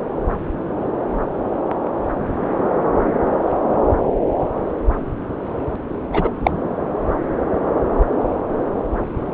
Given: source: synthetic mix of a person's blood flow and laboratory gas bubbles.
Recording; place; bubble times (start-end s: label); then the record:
Doppler ultrasound of blood flow; subclavian vein
6.13-6.29 s: bubbles
6.44-6.51 s: bubbles
From the record:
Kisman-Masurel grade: 213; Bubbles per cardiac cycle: several, 3 to 8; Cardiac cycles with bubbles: 1 to 10%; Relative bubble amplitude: loud (0.450 to 0.775); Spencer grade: 1 (occasional bubble signal discernible with the cardiac motion signal, with majority of cardiac periods free of bubbles); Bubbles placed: anywhere in the cardiac cycle